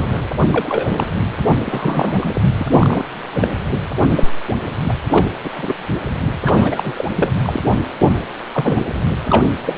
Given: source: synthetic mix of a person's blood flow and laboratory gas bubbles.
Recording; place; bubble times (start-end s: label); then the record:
Doppler ultrasound of blood flow; precordium
0.00-0.26 s: bubbles
0.49-1.08 s: bubbles
1.66-2.42 s: bubbles
2.55-2.66 s: bubbles
2.76-3.05 s: bubbles
3.35-3.47 s: bubbles
3.69-3.79 s: bubbles
4.10-4.30 s: bubbles
4.88-4.93 s: bubbles
5.09-5.26 s: bubbles
5.44-5.50 s: bubbles
5.54-5.74 s: bubbles
6.45-6.95 s: bubbles
6.97-7.05 s: bubbles
7.16-7.29 s: bubbles
7.43-7.60 s: bubbles
8.52-8.81 s: bubbles
9.05-9.08 s: bubbles
9.28-9.47 s: bubbles
9.65-9.78 s: bubbles
From the record:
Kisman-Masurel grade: 243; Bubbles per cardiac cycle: several, 3 to 8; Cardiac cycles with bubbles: 100%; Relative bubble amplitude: loud (0.450 to 0.775); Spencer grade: 3 (all of the cardiac periods contain showers or single bubble signals, but not dominating or overriding the cardiac motion signals); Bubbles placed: anywhere in the cardiac cycle